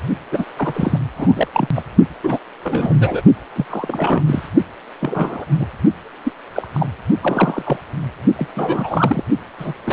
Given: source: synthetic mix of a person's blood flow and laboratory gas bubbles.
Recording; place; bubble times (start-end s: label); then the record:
Doppler ultrasound of blood flow; precordium
0.32-0.45 s: bubbles
0.57-0.99 s: bubbles
1.16-1.48 s: bubbles
1.53-1.69 s: bubbles
1.74-1.83 s: bubbles
2.23-2.39 s: bubbles
2.62-3.22 s: bubbles
3.55-3.65 s: bubbles
3.70-4.23 s: bubbles
4.27-4.42 s: bubbles
5.00-5.45 s: bubbles
5.58-5.67 s: bubbles
6.25-6.32 s: bubbles
6.54-6.67 s: bubbles
6.73-6.87 s: bubbles
7.21-7.77 s: bubbles
8.37-8.48 s: bubbles
8.56-9.22 s: bubbles
9.58-9.73 s: bubbles
9.86-9.93 s: bubbles
From the record:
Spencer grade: 3 (all of the cardiac periods contain showers or single bubble signals, but not dominating or overriding the cardiac motion signals); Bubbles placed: only in the low amplitude regions of the cardiac cycle